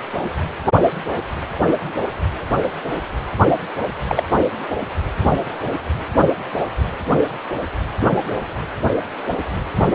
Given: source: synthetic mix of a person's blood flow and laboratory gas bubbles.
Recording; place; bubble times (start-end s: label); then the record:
Doppler ultrasound of blood flow; precordium
4.08-4.24 s: bubbles
From the record:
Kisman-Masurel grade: 112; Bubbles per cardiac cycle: 1 to 2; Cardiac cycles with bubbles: 1 to 10%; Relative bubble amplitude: moderate (0.250 to 0.450); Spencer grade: 1 (occasional bubble signal discernible with the cardiac motion signal, with majority of cardiac periods free of bubbles); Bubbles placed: anywhere in the cardiac cycle